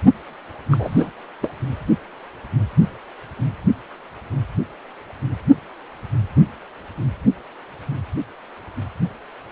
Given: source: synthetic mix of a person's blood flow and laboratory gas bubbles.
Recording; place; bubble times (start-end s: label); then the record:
Doppler ultrasound of blood flow; precordium
0.71-1.10 s: bubbles
1.42-1.51 s: bubbles
From the record:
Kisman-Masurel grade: 212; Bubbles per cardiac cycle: several, 3 to 8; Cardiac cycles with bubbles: 1 to 10%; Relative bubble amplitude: moderate (0.250 to 0.450); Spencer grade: 1 (occasional bubble signal discernible with the cardiac motion signal, with majority of cardiac periods free of bubbles); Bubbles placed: only in the low amplitude regions of the cardiac cycle